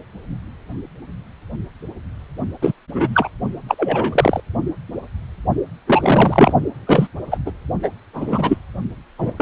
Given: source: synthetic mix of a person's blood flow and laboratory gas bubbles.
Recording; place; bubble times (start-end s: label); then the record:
Doppler ultrasound of blood flow; precordium
2.61-2.72 s: bubbles
2.92-3.29 s: bubbles
3.68-4.40 s: bubbles
5.88-6.53 s: bubbles
6.87-7.08 s: bubbles
7.31-7.38 s: bubbles
7.46-7.52 s: bubbles
7.82-7.90 s: bubbles
8.13-8.57 s: bubbles
9.18-9.32 s: bubbles
9.37-9.42 s: bubbles
From the record:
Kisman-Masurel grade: 233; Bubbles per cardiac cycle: several, 3 to 8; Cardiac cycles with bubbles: 50 to 99%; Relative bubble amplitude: loud (0.450 to 0.775); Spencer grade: 3 (all of the cardiac periods contain showers or single bubble signals, but not dominating or overriding the cardiac motion signals); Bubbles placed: only in the low amplitude regions of the cardiac cycle